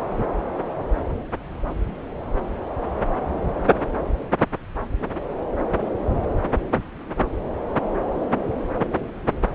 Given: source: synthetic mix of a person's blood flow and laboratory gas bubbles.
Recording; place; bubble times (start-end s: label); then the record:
Doppler ultrasound of blood flow; subclavian vein
no bubbles
From the record:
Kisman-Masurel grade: 000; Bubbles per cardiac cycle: 0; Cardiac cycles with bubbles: 0%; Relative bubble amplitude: no bubbles discernible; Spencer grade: 0 (complete lack of bubble signals)